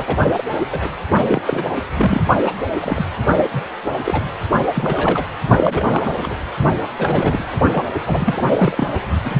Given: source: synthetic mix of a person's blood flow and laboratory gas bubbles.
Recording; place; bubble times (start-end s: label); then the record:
Doppler ultrasound of blood flow; precordium
0.00-0.17 s: bubbles
0.37-0.44 s: bubbles
0.70-0.88 s: bubbles
1.29-1.42 s: bubbles
1.46-1.65 s: bubbles
1.87-2.24 s: bubbles
2.43-2.56 s: bubbles
2.78-3.05 s: bubbles
3.53-3.62 s: bubbles
4.04-4.25 s: bubbles
4.75-5.25 s: bubbles
5.55-6.34 s: bubbles
6.97-7.45 s: bubbles
7.72-7.83 s: bubbles
8.06-8.87 s: bubbles
9.24-9.35 s: bubbles
From the record:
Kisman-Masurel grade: 242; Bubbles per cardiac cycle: several, 3 to 8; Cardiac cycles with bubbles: 100%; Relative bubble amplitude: moderate (0.250 to 0.450); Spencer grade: 3 (all of the cardiac periods contain showers or single bubble signals, but not dominating or overriding the cardiac motion signals); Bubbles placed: only in the low amplitude regions of the cardiac cycle